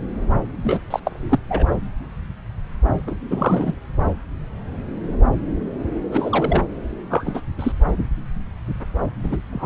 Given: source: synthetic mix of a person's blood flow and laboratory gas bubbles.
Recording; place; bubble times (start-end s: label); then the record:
Doppler ultrasound of blood flow; subclavian vein
0.63-0.78 s: bubbles
0.90-1.00 s: bubbles
1.04-1.39 s: bubbles
1.49-1.67 s: bubbles
3.06-3.15 s: bubbles
3.30-3.77 s: bubbles
6.11-6.61 s: bubbles
7.09-7.41 s: bubbles
7.58-7.72 s: bubbles
9.23-9.38 s: bubbles
9.51-9.66 s: bubbles
From the record:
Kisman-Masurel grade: 223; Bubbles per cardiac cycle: several, 3 to 8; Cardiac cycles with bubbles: 10 to 50%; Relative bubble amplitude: loud (0.450 to 0.775); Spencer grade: 2 (many but less than half of the cardiac periods contain bubble signals, singularly or in groups); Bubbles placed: anywhere in the cardiac cycle